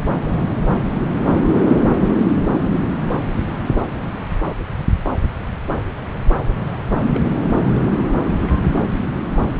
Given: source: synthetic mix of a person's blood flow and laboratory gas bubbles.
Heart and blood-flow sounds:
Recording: Doppler ultrasound of blood flow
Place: subclavian vein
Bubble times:
7.14-7.20 s: bubbles
7.48-7.57 s: bubbles
From the record:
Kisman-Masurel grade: 111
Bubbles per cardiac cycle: 1 to 2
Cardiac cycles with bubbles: 1 to 10%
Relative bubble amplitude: barely perceptible (0.100 to 0.250)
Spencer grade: 1 (occasional bubble signal discernible with the cardiac motion signal, with majority of cardiac periods free of bubbles)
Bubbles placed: anywhere in the cardiac cycle

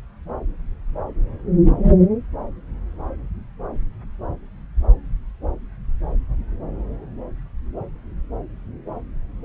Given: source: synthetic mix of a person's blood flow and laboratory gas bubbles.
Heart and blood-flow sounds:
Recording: Doppler ultrasound of blood flow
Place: subclavian vein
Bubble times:
no bubbles
From the record:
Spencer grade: 0 (complete lack of bubble signals)

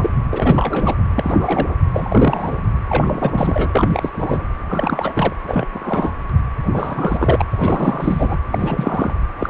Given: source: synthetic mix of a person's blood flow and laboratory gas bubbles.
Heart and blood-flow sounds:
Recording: Doppler ultrasound of blood flow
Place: precordium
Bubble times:
0.00-0.10 s: bubbles
0.31-0.96 s: bubbles
1.15-1.75 s: bubbles
1.94-2.57 s: bubbles
2.88-4.11 s: bubbles
4.15-4.45 s: bubbles
4.69-5.33 s: bubbles
5.48-5.67 s: bubbles
5.73-6.14 s: bubbles
6.72-7.45 s: bubbles
7.51-8.38 s: bubbles
8.51-9.13 s: bubbles
9.38-9.50 s: bubbles
From the record:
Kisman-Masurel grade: 332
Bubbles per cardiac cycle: rolling drumbeat, 9 or more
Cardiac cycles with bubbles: 50 to 99%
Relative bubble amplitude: moderate (0.250 to 0.450)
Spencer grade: 3 (all of the cardiac periods contain showers or single bubble signals, but not dominating or overriding the cardiac motion signals)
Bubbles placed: anywhere in the cardiac cycle

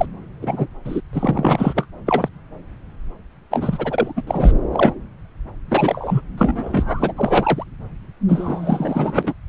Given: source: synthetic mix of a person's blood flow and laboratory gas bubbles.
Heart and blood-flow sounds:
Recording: Doppler ultrasound of blood flow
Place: subclavian vein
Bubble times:
0.00-0.06 s: bubbles
0.41-0.67 s: bubbles
0.84-1.01 s: bubbles
1.13-1.85 s: bubbles
2.06-2.29 s: bubbles
3.50-4.12 s: bubbles
4.16-4.22 s: bubbles
4.27-4.53 s: bubbles
4.71-4.92 s: bubbles
5.68-6.21 s: bubbles
6.38-7.12 s: bubbles
7.17-7.64 s: bubbles
8.28-9.34 s: bubbles
From the record:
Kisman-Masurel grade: 243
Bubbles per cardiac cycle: several, 3 to 8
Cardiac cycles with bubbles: 100%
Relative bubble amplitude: loud (0.450 to 0.775)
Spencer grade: 3 (all of the cardiac periods contain showers or single bubble signals, but not dominating or overriding the cardiac motion signals)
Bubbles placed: anywhere in the cardiac cycle

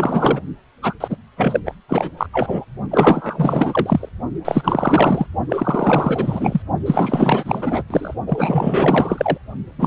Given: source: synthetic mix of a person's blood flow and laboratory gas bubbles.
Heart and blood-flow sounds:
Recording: Doppler ultrasound of blood flow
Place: precordium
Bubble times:
0.00-0.40 s: bubbles
0.82-0.94 s: bubbles
1.00-1.17 s: bubbles
1.36-1.60 s: bubbles
1.65-1.74 s: bubbles
1.88-2.10 s: bubbles
2.17-2.27 s: bubbles
2.32-2.65 s: bubbles
2.91-4.09 s: bubbles
4.45-5.27 s: bubbles
5.49-6.62 s: bubbles
6.86-7.83 s: bubbles
7.90-8.14 s: bubbles
8.26-9.38 s: bubbles
9.78-9.87 s: bubbles
From the record:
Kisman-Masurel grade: 444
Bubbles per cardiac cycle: continuous sound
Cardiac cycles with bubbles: 100%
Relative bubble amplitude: maximal (0.775 to 0.999)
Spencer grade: 4 (maximum detectable bubble signal sounding continuously throughout systole and diastole of every cardiac period, and overriding the amplitude of the normal cardiac signals)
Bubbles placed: only in the low amplitude regions of the cardiac cycle

